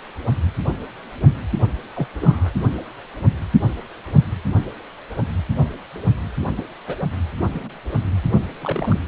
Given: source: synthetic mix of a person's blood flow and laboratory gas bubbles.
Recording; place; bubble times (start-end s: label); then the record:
Doppler ultrasound of blood flow; precordium
1.96-2.07 s: bubbles
2.21-2.50 s: bubbles
6.57-6.62 s: bubbles
6.87-6.96 s: bubbles
7.46-7.79 s: bubbles
8.62-8.99 s: bubbles
From the record:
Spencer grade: 2 (many but less than half of the cardiac periods contain bubble signals, singularly or in groups); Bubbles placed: anywhere in the cardiac cycle